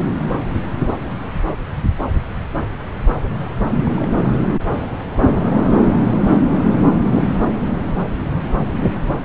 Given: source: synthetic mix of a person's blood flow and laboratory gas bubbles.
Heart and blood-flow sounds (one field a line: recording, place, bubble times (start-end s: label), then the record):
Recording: Doppler ultrasound of blood flow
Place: subclavian vein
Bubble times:
3.74-3.81 s: bubbles
3.83-3.91 s: bubbles
3.96-4.07 s: bubbles
4.12-4.47 s: bubbles
From the record:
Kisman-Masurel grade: 211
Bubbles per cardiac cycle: several, 3 to 8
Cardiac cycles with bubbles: 1 to 10%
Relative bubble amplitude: barely perceptible (0.100 to 0.250)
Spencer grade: 1 (occasional bubble signal discernible with the cardiac motion signal, with majority of cardiac periods free of bubbles)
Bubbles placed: anywhere in the cardiac cycle